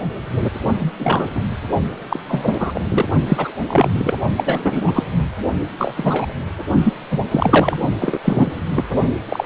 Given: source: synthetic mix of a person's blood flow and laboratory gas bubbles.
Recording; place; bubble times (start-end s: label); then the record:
Doppler ultrasound of blood flow; precordium
0.80-0.92 s: bubbles
0.98-1.27 s: bubbles
1.35-1.44 s: bubbles
2.09-2.19 s: bubbles
2.28-2.80 s: bubbles
2.88-3.08 s: bubbles
3.26-3.52 s: bubbles
3.67-4.14 s: bubbles
4.37-5.04 s: bubbles
5.77-6.26 s: bubbles
6.83-6.93 s: bubbles
7.11-7.18 s: bubbles
7.31-7.77 s: bubbles
8.00-8.19 s: bubbles
8.24-8.52 s: bubbles
8.75-8.84 s: bubbles
9.29-9.46 s: bubbles
From the record:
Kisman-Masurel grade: 243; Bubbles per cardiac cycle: several, 3 to 8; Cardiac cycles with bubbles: 100%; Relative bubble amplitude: loud (0.450 to 0.775); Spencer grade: 3 (all of the cardiac periods contain showers or single bubble signals, but not dominating or overriding the cardiac motion signals); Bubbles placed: only in the low amplitude regions of the cardiac cycle